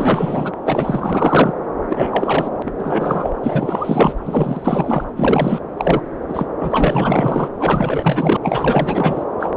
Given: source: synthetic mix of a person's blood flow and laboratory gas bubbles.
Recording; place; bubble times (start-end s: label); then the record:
Doppler ultrasound of blood flow; subclavian vein
0.00-0.53 s: bubbles
0.65-1.54 s: bubbles
1.89-2.50 s: bubbles
2.66-2.72 s: bubbles
2.78-3.31 s: bubbles
3.43-4.12 s: bubbles
4.25-5.04 s: bubbles
5.16-5.59 s: bubbles
5.77-6.01 s: bubbles
6.28-6.46 s: bubbles
6.60-7.49 s: bubbles
7.55-8.37 s: bubbles
8.43-9.24 s: bubbles
9.39-9.52 s: bubbles
9.54-9.57 s: bubbles
From the record:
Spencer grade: 4 (maximum detectable bubble signal sounding continuously throughout systole and diastole of every cardiac period, and overriding the amplitude of the normal cardiac signals); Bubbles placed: anywhere in the cardiac cycle